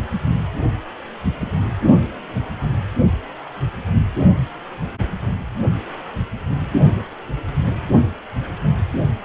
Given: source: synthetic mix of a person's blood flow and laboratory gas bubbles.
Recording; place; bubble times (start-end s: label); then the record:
Doppler ultrasound of blood flow; precordium
1.41-1.52 s: bubbles
From the record:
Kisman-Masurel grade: 122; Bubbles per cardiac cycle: 1 to 2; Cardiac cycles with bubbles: 10 to 50%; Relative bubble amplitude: moderate (0.250 to 0.450); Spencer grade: 2 (many but less than half of the cardiac periods contain bubble signals, singularly or in groups); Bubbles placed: only in the low amplitude regions of the cardiac cycle